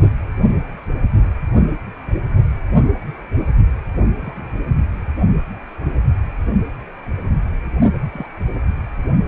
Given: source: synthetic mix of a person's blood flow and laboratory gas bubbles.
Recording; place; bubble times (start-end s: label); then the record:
Doppler ultrasound of blood flow; precordium
4.21-4.47 s: bubbles
7.93-7.98 s: bubbles
8.12-8.26 s: bubbles
From the record:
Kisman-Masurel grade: 121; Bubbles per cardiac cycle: 1 to 2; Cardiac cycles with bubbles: 10 to 50%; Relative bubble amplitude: barely perceptible (0.100 to 0.250); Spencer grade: 2 (many but less than half of the cardiac periods contain bubble signals, singularly or in groups); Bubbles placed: anywhere in the cardiac cycle